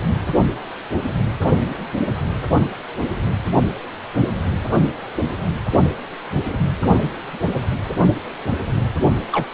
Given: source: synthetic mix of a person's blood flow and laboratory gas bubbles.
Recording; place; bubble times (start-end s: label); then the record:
Doppler ultrasound of blood flow; precordium
9.31-9.46 s: bubbles
From the record:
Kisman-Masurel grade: 112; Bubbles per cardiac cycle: 1 to 2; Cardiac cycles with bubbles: 1 to 10%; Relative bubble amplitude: moderate (0.250 to 0.450); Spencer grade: 1 (occasional bubble signal discernible with the cardiac motion signal, with majority of cardiac periods free of bubbles); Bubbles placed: only in the low amplitude regions of the cardiac cycle